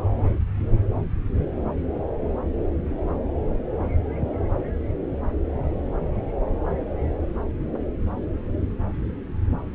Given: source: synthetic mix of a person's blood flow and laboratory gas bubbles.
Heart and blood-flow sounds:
Doppler ultrasound of blood flow; subclavian vein
no bubbles
From the record:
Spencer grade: 0 (complete lack of bubble signals)

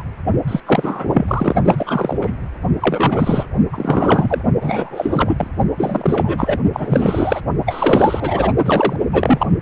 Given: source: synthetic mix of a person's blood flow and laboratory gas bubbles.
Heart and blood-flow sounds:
Doppler ultrasound of blood flow; precordium
0.00-0.03 s: bubbles
0.48-0.60 s: bubbles
0.67-1.05 s: bubbles
1.13-1.55 s: bubbles
1.64-2.17 s: bubbles
2.21-2.34 s: bubbles
2.80-3.46 s: bubbles
3.72-4.42 s: bubbles
4.61-5.47 s: bubbles
5.78-6.58 s: bubbles
6.73-7.41 s: bubbles
7.66-8.53 s: bubbles
8.65-8.96 s: bubbles
9.12-9.47 s: bubbles
From the record:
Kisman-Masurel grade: 343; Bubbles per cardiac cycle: rolling drumbeat, 9 or more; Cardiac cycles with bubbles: 100%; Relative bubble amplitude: loud (0.450 to 0.775); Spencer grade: 3 (all of the cardiac periods contain showers or single bubble signals, but not dominating or overriding the cardiac motion signals); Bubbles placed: only in the low amplitude regions of the cardiac cycle

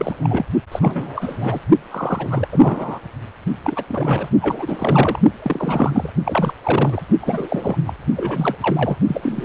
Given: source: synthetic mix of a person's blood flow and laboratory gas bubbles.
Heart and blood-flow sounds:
Doppler ultrasound of blood flow; precordium
0.00-0.46 s: bubbles
0.72-1.60 s: bubbles
1.91-2.48 s: bubbles
2.52-3.00 s: bubbles
3.64-3.83 s: bubbles
3.88-4.29 s: bubbles
4.41-5.19 s: bubbles
5.43-6.12 s: bubbles
6.25-6.54 s: bubbles
6.63-7.03 s: bubbles
7.20-7.76 s: bubbles
7.86-7.93 s: bubbles
8.15-8.55 s: bubbles
8.61-8.96 s: bubbles
9.08-9.45 s: bubbles
From the record:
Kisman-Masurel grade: 343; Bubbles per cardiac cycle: rolling drumbeat, 9 or more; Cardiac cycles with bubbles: 100%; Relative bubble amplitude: loud (0.450 to 0.775); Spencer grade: 3 (all of the cardiac periods contain showers or single bubble signals, but not dominating or overriding the cardiac motion signals); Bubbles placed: only in the low amplitude regions of the cardiac cycle

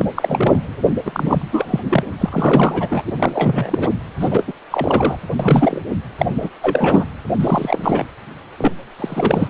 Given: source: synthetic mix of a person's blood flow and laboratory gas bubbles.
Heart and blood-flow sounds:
Doppler ultrasound of blood flow; precordium
0.00-0.05 s: bubbles
0.15-0.75 s: bubbles
1.05-1.80 s: bubbles
1.90-2.04 s: bubbles
2.20-3.03 s: bubbles
3.07-3.88 s: bubbles
4.21-4.45 s: bubbles
4.47-4.53 s: bubbles
4.71-5.17 s: bubbles
5.39-5.82 s: bubbles
6.17-6.26 s: bubbles
6.42-6.50 s: bubbles
6.62-7.04 s: bubbles
7.39-8.05 s: bubbles
8.57-8.72 s: bubbles
8.98-9.48 s: bubbles
From the record:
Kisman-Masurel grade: 343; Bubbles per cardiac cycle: rolling drumbeat, 9 or more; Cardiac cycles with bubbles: 100%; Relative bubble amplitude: loud (0.450 to 0.775); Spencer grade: 3 (all of the cardiac periods contain showers or single bubble signals, but not dominating or overriding the cardiac motion signals); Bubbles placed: anywhere in the cardiac cycle

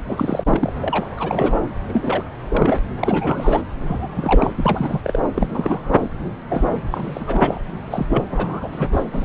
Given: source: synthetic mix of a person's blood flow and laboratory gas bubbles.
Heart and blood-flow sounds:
Doppler ultrasound of blood flow; subclavian vein
0.08-0.71 s: bubbles
0.81-1.06 s: bubbles
1.17-1.60 s: bubbles
1.88-2.24 s: bubbles
2.49-2.79 s: bubbles
3.00-3.62 s: bubbles
3.86-4.08 s: bubbles
4.16-4.51 s: bubbles
4.58-5.21 s: bubbles
5.34-5.92 s: bubbles
6.00-6.09 s: bubbles
6.50-6.81 s: bubbles
6.91-7.62 s: bubbles
7.91-8.23 s: bubbles
8.30-8.68 s: bubbles
8.71-8.88 s: bubbles
8.92-9.03 s: bubbles
9.12-9.25 s: bubbles
From the record:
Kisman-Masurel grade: 342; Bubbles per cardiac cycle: rolling drumbeat, 9 or more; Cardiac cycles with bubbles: 100%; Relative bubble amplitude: moderate (0.250 to 0.450); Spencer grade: 3 (all of the cardiac periods contain showers or single bubble signals, but not dominating or overriding the cardiac motion signals); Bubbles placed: anywhere in the cardiac cycle

